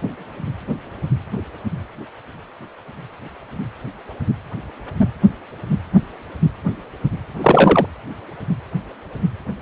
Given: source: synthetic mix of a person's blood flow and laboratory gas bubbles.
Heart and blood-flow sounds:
Doppler ultrasound of blood flow; precordium
7.41-7.86 s: bubbles
From the record:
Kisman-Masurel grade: 213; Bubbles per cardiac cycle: several, 3 to 8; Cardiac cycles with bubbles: 1 to 10%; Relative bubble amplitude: loud (0.450 to 0.775); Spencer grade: 1 (occasional bubble signal discernible with the cardiac motion signal, with majority of cardiac periods free of bubbles); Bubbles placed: anywhere in the cardiac cycle

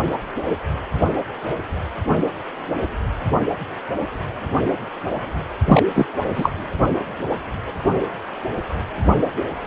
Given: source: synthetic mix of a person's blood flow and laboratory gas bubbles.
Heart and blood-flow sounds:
Doppler ultrasound of blood flow; precordium
5.67-5.83 s: bubbles
5.95-6.05 s: bubbles
6.35-6.50 s: bubbles
From the record:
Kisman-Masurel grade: 213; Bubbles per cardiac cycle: several, 3 to 8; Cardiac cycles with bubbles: 1 to 10%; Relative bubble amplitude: loud (0.450 to 0.775); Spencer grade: 1 (occasional bubble signal discernible with the cardiac motion signal, with majority of cardiac periods free of bubbles); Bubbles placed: anywhere in the cardiac cycle

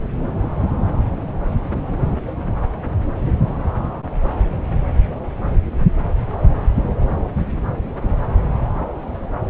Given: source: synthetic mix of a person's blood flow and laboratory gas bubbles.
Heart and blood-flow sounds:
Doppler ultrasound of blood flow; subclavian vein
no bubbles
From the record:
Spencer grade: 0 (complete lack of bubble signals)

